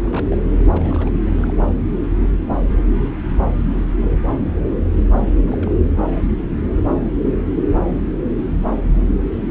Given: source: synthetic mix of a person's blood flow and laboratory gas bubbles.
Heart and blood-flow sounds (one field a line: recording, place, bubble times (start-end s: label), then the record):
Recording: Doppler ultrasound of blood flow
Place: subclavian vein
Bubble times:
0.00-0.46 s: bubbles
0.57-1.13 s: bubbles
1.22-1.58 s: bubbles
5.44-5.73 s: bubbles
From the record:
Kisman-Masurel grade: 221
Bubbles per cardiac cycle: several, 3 to 8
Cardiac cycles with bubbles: 10 to 50%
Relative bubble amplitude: barely perceptible (0.100 to 0.250)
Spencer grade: 2 (many but less than half of the cardiac periods contain bubble signals, singularly or in groups)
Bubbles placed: anywhere in the cardiac cycle